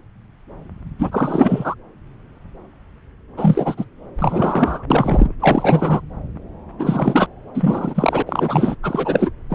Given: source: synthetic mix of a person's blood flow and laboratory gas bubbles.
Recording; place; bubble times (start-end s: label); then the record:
Doppler ultrasound of blood flow; subclavian vein
0.99-1.74 s: bubbles
3.37-3.85 s: bubbles
4.19-4.83 s: bubbles
4.90-5.32 s: bubbles
5.40-6.00 s: bubbles
6.79-7.27 s: bubbles
7.54-8.22 s: bubbles
8.27-8.75 s: bubbles
8.83-9.30 s: bubbles
9.50-9.55 s: bubbles
From the record:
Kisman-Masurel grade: 333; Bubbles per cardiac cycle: rolling drumbeat, 9 or more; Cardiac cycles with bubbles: 50 to 99%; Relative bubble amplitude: loud (0.450 to 0.775); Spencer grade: 3 (all of the cardiac periods contain showers or single bubble signals, but not dominating or overriding the cardiac motion signals); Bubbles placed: anywhere in the cardiac cycle